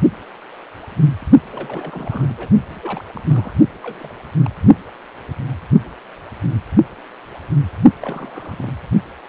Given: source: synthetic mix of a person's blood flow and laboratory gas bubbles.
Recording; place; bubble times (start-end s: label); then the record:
Doppler ultrasound of blood flow; precordium
1.52-2.34 s: bubbles
2.37-2.48 s: bubbles
2.69-2.79 s: bubbles
2.82-3.04 s: bubbles
3.14-3.21 s: bubbles
3.28-3.56 s: bubbles
3.83-4.13 s: bubbles
4.45-4.50 s: bubbles
8.00-8.71 s: bubbles
From the record:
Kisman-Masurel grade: 221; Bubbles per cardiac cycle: several, 3 to 8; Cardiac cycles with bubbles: 10 to 50%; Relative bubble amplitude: barely perceptible (0.100 to 0.250); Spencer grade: 2 (many but less than half of the cardiac periods contain bubble signals, singularly or in groups); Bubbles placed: only in the low amplitude regions of the cardiac cycle